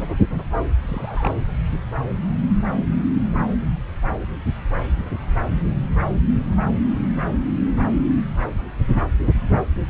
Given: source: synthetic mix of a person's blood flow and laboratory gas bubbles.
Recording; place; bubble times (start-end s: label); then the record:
Doppler ultrasound of blood flow; subclavian vein
0.81-1.32 s: bubbles
From the record:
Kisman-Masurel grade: 111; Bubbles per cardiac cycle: 1 to 2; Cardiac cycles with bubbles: 1 to 10%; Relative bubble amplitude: barely perceptible (0.100 to 0.250); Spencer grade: 1 (occasional bubble signal discernible with the cardiac motion signal, with majority of cardiac periods free of bubbles); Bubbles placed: anywhere in the cardiac cycle